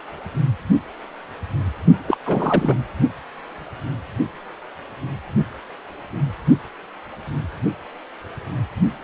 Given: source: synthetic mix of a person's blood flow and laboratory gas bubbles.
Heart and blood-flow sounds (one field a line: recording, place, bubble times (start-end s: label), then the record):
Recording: Doppler ultrasound of blood flow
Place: precordium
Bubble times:
2.08-2.17 s: bubbles
2.25-2.76 s: bubbles
From the record:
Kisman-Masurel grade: 213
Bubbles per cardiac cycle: several, 3 to 8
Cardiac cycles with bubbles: 1 to 10%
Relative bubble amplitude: loud (0.450 to 0.775)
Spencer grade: 1 (occasional bubble signal discernible with the cardiac motion signal, with majority of cardiac periods free of bubbles)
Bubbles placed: anywhere in the cardiac cycle